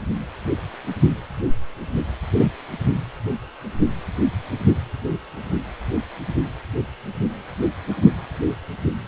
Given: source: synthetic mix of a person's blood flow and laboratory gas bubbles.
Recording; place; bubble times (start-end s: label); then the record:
Doppler ultrasound of blood flow; precordium
2.37-2.52 s: bubbles
From the record:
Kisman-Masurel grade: 113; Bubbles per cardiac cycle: 1 to 2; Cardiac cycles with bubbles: 1 to 10%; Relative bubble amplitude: loud (0.450 to 0.775); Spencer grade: 1 (occasional bubble signal discernible with the cardiac motion signal, with majority of cardiac periods free of bubbles); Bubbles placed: only in the low amplitude regions of the cardiac cycle